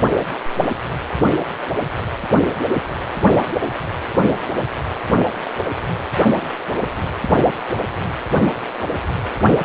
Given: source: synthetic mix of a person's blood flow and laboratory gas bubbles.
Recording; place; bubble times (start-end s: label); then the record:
Doppler ultrasound of blood flow; precordium
no bubbles
From the record:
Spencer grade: 0 (complete lack of bubble signals)